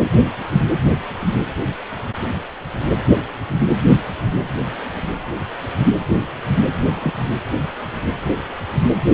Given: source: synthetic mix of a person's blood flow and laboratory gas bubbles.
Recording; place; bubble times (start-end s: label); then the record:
Doppler ultrasound of blood flow; precordium
6.81-7.18 s: bubbles
From the record:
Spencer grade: 1 (occasional bubble signal discernible with the cardiac motion signal, with majority of cardiac periods free of bubbles); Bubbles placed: anywhere in the cardiac cycle